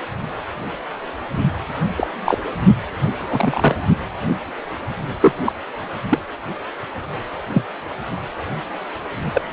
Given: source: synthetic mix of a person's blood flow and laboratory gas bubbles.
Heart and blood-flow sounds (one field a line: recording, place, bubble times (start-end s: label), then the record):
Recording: Doppler ultrasound of blood flow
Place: precordium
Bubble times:
1.96-2.07 s: bubbles
2.25-2.38 s: bubbles
3.30-3.75 s: bubbles
5.21-5.32 s: bubbles
5.44-5.52 s: bubbles
6.09-6.18 s: bubbles
7.53-7.64 s: bubbles
9.33-9.42 s: bubbles
From the record:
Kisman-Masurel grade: 123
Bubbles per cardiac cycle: 1 to 2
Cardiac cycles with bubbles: 10 to 50%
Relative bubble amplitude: loud (0.450 to 0.775)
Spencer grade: 2 (many but less than half of the cardiac periods contain bubble signals, singularly or in groups)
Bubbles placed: anywhere in the cardiac cycle